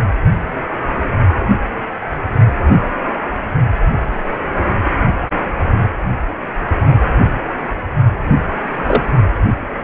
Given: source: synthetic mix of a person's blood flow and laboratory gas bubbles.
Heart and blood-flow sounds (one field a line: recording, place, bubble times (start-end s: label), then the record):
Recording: Doppler ultrasound of blood flow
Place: precordium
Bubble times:
8.85-9.11 s: bubbles
From the record:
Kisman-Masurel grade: 123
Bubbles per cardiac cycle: 1 to 2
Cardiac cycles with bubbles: 10 to 50%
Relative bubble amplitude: loud (0.450 to 0.775)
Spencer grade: 2 (many but less than half of the cardiac periods contain bubble signals, singularly or in groups)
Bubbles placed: anywhere in the cardiac cycle